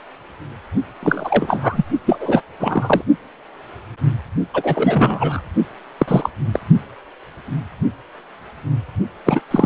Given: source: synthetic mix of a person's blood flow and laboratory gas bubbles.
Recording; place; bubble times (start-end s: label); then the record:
Doppler ultrasound of blood flow; precordium
1.02-1.85 s: bubbles
2.06-2.43 s: bubbles
2.59-3.02 s: bubbles
4.54-5.42 s: bubbles
5.98-6.29 s: bubbles
6.53-6.60 s: bubbles
9.25-9.40 s: bubbles
9.50-9.66 s: bubbles
From the record:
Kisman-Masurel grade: 333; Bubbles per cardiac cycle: rolling drumbeat, 9 or more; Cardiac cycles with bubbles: 50 to 99%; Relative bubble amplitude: loud (0.450 to 0.775); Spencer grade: 3 (all of the cardiac periods contain showers or single bubble signals, but not dominating or overriding the cardiac motion signals); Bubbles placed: only in the low amplitude regions of the cardiac cycle